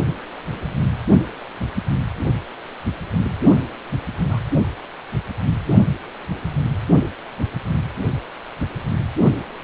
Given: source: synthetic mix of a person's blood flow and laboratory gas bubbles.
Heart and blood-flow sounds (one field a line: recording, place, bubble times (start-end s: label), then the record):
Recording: Doppler ultrasound of blood flow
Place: precordium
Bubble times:
4.29-4.40 s: bubbles
From the record:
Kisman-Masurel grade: 111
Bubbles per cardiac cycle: 1 to 2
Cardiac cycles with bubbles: 1 to 10%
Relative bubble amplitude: barely perceptible (0.100 to 0.250)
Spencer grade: 1 (occasional bubble signal discernible with the cardiac motion signal, with majority of cardiac periods free of bubbles)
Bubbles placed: anywhere in the cardiac cycle